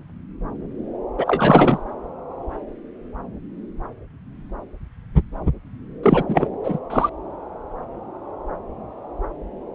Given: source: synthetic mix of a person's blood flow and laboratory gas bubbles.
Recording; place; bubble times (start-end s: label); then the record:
Doppler ultrasound of blood flow; subclavian vein
1.17-1.78 s: bubbles
6.03-6.24 s: bubbles
6.29-6.48 s: bubbles
6.64-6.78 s: bubbles
6.90-7.10 s: bubbles
From the record:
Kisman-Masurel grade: 223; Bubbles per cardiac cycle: several, 3 to 8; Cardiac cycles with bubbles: 10 to 50%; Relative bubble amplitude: loud (0.450 to 0.775); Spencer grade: 2 (many but less than half of the cardiac periods contain bubble signals, singularly or in groups); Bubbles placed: anywhere in the cardiac cycle